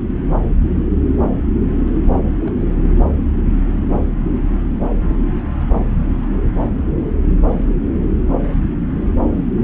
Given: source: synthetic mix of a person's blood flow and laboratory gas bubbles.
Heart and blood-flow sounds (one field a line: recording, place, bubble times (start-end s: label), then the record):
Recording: Doppler ultrasound of blood flow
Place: subclavian vein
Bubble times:
2.39-2.53 s: bubbles
2.58-2.65 s: bubbles
From the record:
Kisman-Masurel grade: 111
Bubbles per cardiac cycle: 1 to 2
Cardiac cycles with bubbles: 1 to 10%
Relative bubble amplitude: barely perceptible (0.100 to 0.250)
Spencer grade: 1 (occasional bubble signal discernible with the cardiac motion signal, with majority of cardiac periods free of bubbles)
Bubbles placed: anywhere in the cardiac cycle